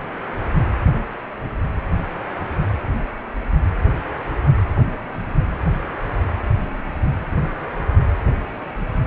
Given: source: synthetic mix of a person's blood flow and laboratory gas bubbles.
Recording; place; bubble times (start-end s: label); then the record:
Doppler ultrasound of blood flow; precordium
no bubbles
From the record:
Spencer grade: 0 (complete lack of bubble signals)